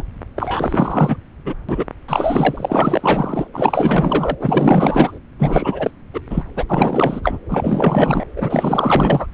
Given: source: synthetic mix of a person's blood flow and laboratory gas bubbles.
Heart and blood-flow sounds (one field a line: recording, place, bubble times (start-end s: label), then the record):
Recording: Doppler ultrasound of blood flow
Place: subclavian vein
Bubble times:
0.00-0.03 s: bubbles
0.35-1.17 s: bubbles
1.46-1.54 s: bubbles
1.69-1.85 s: bubbles
2.08-3.48 s: bubbles
3.52-4.35 s: bubbles
4.39-5.19 s: bubbles
5.38-5.91 s: bubbles
6.13-6.21 s: bubbles
6.30-6.43 s: bubbles
6.56-6.66 s: bubbles
6.68-7.39 s: bubbles
7.49-8.25 s: bubbles
8.36-9.27 s: bubbles
From the record:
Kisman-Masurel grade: 444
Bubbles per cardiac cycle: continuous sound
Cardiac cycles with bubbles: 100%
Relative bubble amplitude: maximal (0.775 to 0.999)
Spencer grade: 4 (maximum detectable bubble signal sounding continuously throughout systole and diastole of every cardiac period, and overriding the amplitude of the normal cardiac signals)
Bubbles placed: anywhere in the cardiac cycle